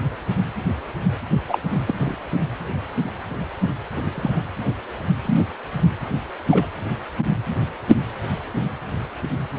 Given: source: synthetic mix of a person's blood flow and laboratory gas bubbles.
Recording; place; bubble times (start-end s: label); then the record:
Doppler ultrasound of blood flow; precordium
1.49-1.59 s: bubbles
1.87-1.96 s: bubbles
1.98-2.16 s: bubbles
3.94-4.42 s: bubbles
5.25-5.41 s: bubbles
6.50-6.67 s: bubbles
From the record:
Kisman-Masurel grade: 122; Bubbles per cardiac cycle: 1 to 2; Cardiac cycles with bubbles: 10 to 50%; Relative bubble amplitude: moderate (0.250 to 0.450); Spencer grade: 2 (many but less than half of the cardiac periods contain bubble signals, singularly or in groups); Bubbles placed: anywhere in the cardiac cycle